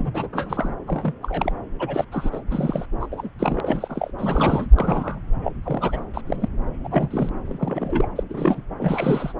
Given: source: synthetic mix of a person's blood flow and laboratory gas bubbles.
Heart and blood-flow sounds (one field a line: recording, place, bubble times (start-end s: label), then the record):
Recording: Doppler ultrasound of blood flow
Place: subclavian vein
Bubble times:
0.00-0.11 s: bubbles
0.13-0.28 s: bubbles
0.33-0.76 s: bubbles
0.86-1.14 s: bubbles
1.22-1.52 s: bubbles
1.79-2.04 s: bubbles
2.11-2.29 s: bubbles
2.32-2.42 s: bubbles
2.50-2.85 s: bubbles
3.00-3.07 s: bubbles
3.11-3.29 s: bubbles
3.39-4.12 s: bubbles
4.18-4.67 s: bubbles
4.75-5.19 s: bubbles
5.43-5.52 s: bubbles
5.62-6.04 s: bubbles
6.13-6.21 s: bubbles
6.26-6.48 s: bubbles
6.83-7.29 s: bubbles
7.47-8.07 s: bubbles
8.16-8.24 s: bubbles
8.29-8.62 s: bubbles
8.79-9.33 s: bubbles
From the record:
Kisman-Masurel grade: 242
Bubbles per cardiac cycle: several, 3 to 8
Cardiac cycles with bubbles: 100%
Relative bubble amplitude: moderate (0.250 to 0.450)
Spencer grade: 3 (all of the cardiac periods contain showers or single bubble signals, but not dominating or overriding the cardiac motion signals)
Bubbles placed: anywhere in the cardiac cycle